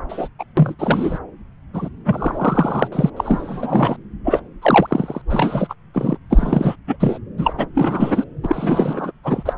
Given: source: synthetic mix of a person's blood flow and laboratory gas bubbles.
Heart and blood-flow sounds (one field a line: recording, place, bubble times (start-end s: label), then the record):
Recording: Doppler ultrasound of blood flow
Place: subclavian vein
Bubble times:
0.08-0.28 s: bubbles
0.39-0.44 s: bubbles
0.57-0.75 s: bubbles
0.79-1.19 s: bubbles
1.73-1.90 s: bubbles
2.05-2.88 s: bubbles
2.92-3.10 s: bubbles
3.17-3.97 s: bubbles
4.24-4.41 s: bubbles
4.62-5.22 s: bubbles
5.29-5.74 s: bubbles
5.94-6.18 s: bubbles
6.30-6.76 s: bubbles
6.87-6.97 s: bubbles
7.00-7.19 s: bubbles
7.38-7.54 s: bubbles
7.58-7.66 s: bubbles
7.75-8.24 s: bubbles
8.43-9.12 s: bubbles
9.23-9.53 s: bubbles
From the record:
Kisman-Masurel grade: 343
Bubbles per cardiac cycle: rolling drumbeat, 9 or more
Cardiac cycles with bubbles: 100%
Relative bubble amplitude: loud (0.450 to 0.775)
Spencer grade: 3 (all of the cardiac periods contain showers or single bubble signals, but not dominating or overriding the cardiac motion signals)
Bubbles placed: anywhere in the cardiac cycle